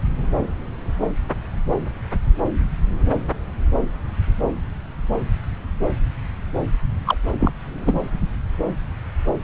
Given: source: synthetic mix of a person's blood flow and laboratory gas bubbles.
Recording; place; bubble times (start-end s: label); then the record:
Doppler ultrasound of blood flow; subclavian vein
7.06-7.17 s: bubbles
7.39-7.51 s: bubbles
7.85-8.11 s: bubbles
From the record:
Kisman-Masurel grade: 212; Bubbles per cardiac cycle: several, 3 to 8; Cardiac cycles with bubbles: 1 to 10%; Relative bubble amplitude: moderate (0.250 to 0.450); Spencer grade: 1 (occasional bubble signal discernible with the cardiac motion signal, with majority of cardiac periods free of bubbles); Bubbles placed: anywhere in the cardiac cycle